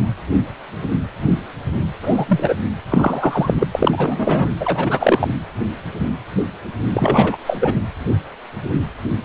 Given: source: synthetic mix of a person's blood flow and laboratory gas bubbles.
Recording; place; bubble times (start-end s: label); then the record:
Doppler ultrasound of blood flow; precordium
2.02-2.25 s: bubbles
2.27-2.54 s: bubbles
2.88-3.55 s: bubbles
3.58-3.67 s: bubbles
3.75-4.51 s: bubbles
4.59-5.28 s: bubbles
6.93-7.37 s: bubbles
7.46-7.58 s: bubbles
7.60-7.74 s: bubbles
From the record:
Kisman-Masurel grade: 223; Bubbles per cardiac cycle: several, 3 to 8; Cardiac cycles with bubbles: 10 to 50%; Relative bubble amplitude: loud (0.450 to 0.775); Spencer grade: 2 (many but less than half of the cardiac periods contain bubble signals, singularly or in groups); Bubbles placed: anywhere in the cardiac cycle